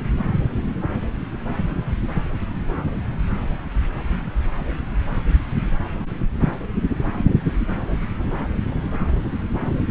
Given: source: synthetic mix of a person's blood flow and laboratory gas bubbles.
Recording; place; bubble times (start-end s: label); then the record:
Doppler ultrasound of blood flow; subclavian vein
no bubbles
From the record:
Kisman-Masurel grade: 000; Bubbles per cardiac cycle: 0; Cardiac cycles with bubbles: 0%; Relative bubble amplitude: no bubbles discernible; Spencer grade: 0 (complete lack of bubble signals)